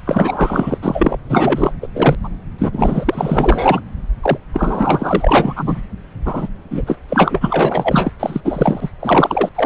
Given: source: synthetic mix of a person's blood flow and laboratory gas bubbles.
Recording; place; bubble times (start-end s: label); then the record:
Doppler ultrasound of blood flow; subclavian vein
0.05-0.78 s: bubbles
0.81-1.18 s: bubbles
1.29-1.74 s: bubbles
1.81-1.88 s: bubbles
1.94-2.15 s: bubbles
2.23-2.29 s: bubbles
2.58-3.81 s: bubbles
4.22-4.38 s: bubbles
4.53-5.80 s: bubbles
6.25-6.48 s: bubbles
6.71-6.82 s: bubbles
6.86-6.98 s: bubbles
7.09-8.11 s: bubbles
8.20-8.41 s: bubbles
8.45-8.89 s: bubbles
9.00-9.50 s: bubbles
9.55-9.66 s: bubbles
From the record:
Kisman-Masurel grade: 444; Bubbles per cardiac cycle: continuous sound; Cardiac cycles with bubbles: 100%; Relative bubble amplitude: maximal (0.775 to 0.999); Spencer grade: 4 (maximum detectable bubble signal sounding continuously throughout systole and diastole of every cardiac period, and overriding the amplitude of the normal cardiac signals); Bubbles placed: anywhere in the cardiac cycle